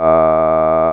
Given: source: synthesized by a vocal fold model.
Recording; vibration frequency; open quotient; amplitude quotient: sustained vowel; 80 Hz; 0.2; 1.4